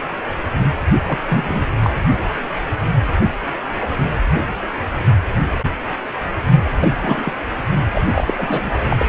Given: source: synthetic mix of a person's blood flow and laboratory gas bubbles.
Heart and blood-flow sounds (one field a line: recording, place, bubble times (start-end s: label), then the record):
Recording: Doppler ultrasound of blood flow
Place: precordium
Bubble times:
1.07-1.19 s: bubbles
1.28-1.65 s: bubbles
1.84-1.90 s: bubbles
6.64-6.96 s: bubbles
7.02-7.32 s: bubbles
7.92-7.99 s: bubbles
8.08-8.33 s: bubbles
8.38-8.78 s: bubbles
8.90-9.05 s: bubbles
From the record:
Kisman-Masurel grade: 232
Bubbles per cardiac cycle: several, 3 to 8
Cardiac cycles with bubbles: 50 to 99%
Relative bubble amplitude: moderate (0.250 to 0.450)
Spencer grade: 3 (all of the cardiac periods contain showers or single bubble signals, but not dominating or overriding the cardiac motion signals)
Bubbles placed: only in the low amplitude regions of the cardiac cycle